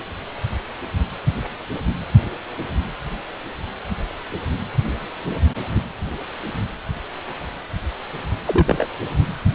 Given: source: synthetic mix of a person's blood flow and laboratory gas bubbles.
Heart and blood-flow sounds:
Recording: Doppler ultrasound of blood flow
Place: precordium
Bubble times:
8.46-8.86 s: bubbles
From the record:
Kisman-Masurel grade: 112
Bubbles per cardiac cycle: 1 to 2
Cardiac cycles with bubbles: 1 to 10%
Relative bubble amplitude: moderate (0.250 to 0.450)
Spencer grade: 1 (occasional bubble signal discernible with the cardiac motion signal, with majority of cardiac periods free of bubbles)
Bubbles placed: anywhere in the cardiac cycle

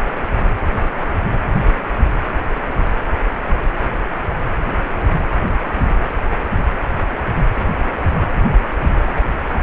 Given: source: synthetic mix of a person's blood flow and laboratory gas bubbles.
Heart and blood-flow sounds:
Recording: Doppler ultrasound of blood flow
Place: precordium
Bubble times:
no bubbles
From the record:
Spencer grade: 0 (complete lack of bubble signals)

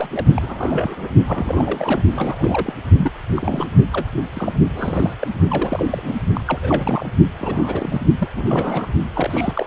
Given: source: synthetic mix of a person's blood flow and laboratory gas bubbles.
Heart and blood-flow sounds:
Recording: Doppler ultrasound of blood flow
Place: precordium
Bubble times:
0.00-0.08 s: bubbles
0.11-0.25 s: bubbles
0.34-1.08 s: bubbles
1.27-2.02 s: bubbles
2.10-2.73 s: bubbles
2.98-3.11 s: bubbles
3.35-3.65 s: bubbles
3.93-4.06 s: bubbles
4.34-4.53 s: bubbles
4.75-5.16 s: bubbles
5.19-5.27 s: bubbles
5.48-6.15 s: bubbles
6.34-6.44 s: bubbles
6.47-7.08 s: bubbles
7.38-8.02 s: bubbles
8.18-8.29 s: bubbles
8.36-8.88 s: bubbles
9.14-9.66 s: bubbles
From the record:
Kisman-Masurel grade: 342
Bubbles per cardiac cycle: rolling drumbeat, 9 or more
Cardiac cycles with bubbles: 100%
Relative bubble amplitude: moderate (0.250 to 0.450)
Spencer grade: 3 (all of the cardiac periods contain showers or single bubble signals, but not dominating or overriding the cardiac motion signals)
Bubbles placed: only in the low amplitude regions of the cardiac cycle

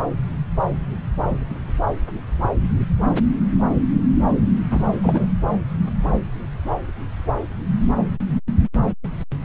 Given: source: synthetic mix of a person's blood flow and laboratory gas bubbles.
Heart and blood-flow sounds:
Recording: Doppler ultrasound of blood flow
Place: subclavian vein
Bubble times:
4.71-4.83 s: bubbles
5.03-5.27 s: bubbles
From the record:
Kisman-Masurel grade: 212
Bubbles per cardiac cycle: several, 3 to 8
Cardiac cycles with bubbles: 1 to 10%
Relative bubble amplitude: moderate (0.250 to 0.450)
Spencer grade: 1 (occasional bubble signal discernible with the cardiac motion signal, with majority of cardiac periods free of bubbles)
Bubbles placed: anywhere in the cardiac cycle

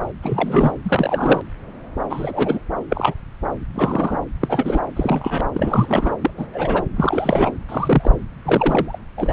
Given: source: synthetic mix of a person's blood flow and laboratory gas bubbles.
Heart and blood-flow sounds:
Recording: Doppler ultrasound of blood flow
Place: subclavian vein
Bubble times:
0.22-0.73 s: bubbles
0.82-1.42 s: bubbles
2.10-2.60 s: bubbles
2.90-3.14 s: bubbles
3.74-4.20 s: bubbles
4.41-4.79 s: bubbles
4.96-5.44 s: bubbles
5.54-6.15 s: bubbles
6.21-6.31 s: bubbles
6.37-6.46 s: bubbles
6.53-6.87 s: bubbles
6.96-7.52 s: bubbles
7.69-8.12 s: bubbles
8.45-8.98 s: bubbles
9.17-9.33 s: bubbles
From the record:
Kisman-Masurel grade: 232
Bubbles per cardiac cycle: several, 3 to 8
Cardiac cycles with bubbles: 50 to 99%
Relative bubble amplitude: moderate (0.250 to 0.450)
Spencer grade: 3 (all of the cardiac periods contain showers or single bubble signals, but not dominating or overriding the cardiac motion signals)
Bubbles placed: anywhere in the cardiac cycle

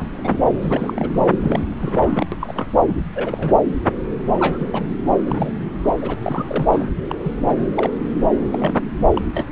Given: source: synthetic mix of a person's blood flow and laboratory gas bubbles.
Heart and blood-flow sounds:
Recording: Doppler ultrasound of blood flow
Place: subclavian vein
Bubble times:
0.00-0.44 s: bubbles
0.61-1.29 s: bubbles
1.41-1.65 s: bubbles
1.81-2.26 s: bubbles
2.31-2.36 s: bubbles
2.40-2.83 s: bubbles
2.88-2.98 s: bubbles
3.14-3.57 s: bubbles
4.38-4.82 s: bubbles
5.26-5.50 s: bubbles
5.83-5.95 s: bubbles
6.02-6.14 s: bubbles
6.22-6.85 s: bubbles
7.07-7.15 s: bubbles
7.24-7.33 s: bubbles
7.46-7.56 s: bubbles
7.75-7.92 s: bubbles
8.32-8.38 s: bubbles
8.53-8.74 s: bubbles
9.11-9.21 s: bubbles
9.34-9.45 s: bubbles
From the record:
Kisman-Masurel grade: 242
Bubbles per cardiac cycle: several, 3 to 8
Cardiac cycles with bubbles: 100%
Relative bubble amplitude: moderate (0.250 to 0.450)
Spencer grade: 3 (all of the cardiac periods contain showers or single bubble signals, but not dominating or overriding the cardiac motion signals)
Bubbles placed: anywhere in the cardiac cycle

